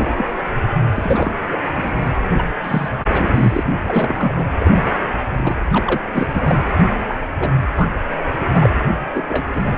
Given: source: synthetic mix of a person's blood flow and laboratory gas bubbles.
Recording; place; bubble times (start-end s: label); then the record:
Doppler ultrasound of blood flow; precordium
0.00-0.10 s: bubbles
0.13-0.26 s: bubbles
0.94-1.35 s: bubbles
1.46-1.57 s: bubbles
1.76-1.91 s: bubbles
2.38-2.44 s: bubbles
2.64-2.89 s: bubbles
3.09-3.64 s: bubbles
3.83-4.48 s: bubbles
4.59-4.83 s: bubbles
5.29-5.56 s: bubbles
5.72-6.00 s: bubbles
6.14-6.28 s: bubbles
6.33-6.62 s: bubbles
7.08-7.15 s: bubbles
7.39-7.50 s: bubbles
7.77-7.88 s: bubbles
8.54-8.70 s: bubbles
9.14-9.22 s: bubbles
9.28-9.62 s: bubbles
9.65-9.76 s: bubbles
From the record:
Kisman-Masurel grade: 242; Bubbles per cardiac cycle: several, 3 to 8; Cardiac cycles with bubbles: 100%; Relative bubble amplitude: moderate (0.250 to 0.450); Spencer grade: 3 (all of the cardiac periods contain showers or single bubble signals, but not dominating or overriding the cardiac motion signals); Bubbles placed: anywhere in the cardiac cycle